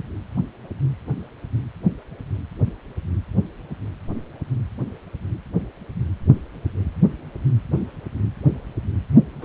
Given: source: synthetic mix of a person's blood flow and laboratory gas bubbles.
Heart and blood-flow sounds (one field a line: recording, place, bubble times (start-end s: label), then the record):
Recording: Doppler ultrasound of blood flow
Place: precordium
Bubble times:
9.41-9.45 s: bubbles
From the record:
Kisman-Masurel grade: 212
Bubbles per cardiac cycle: several, 3 to 8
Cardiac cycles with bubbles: 1 to 10%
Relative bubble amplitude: moderate (0.250 to 0.450)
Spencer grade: 1 (occasional bubble signal discernible with the cardiac motion signal, with majority of cardiac periods free of bubbles)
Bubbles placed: anywhere in the cardiac cycle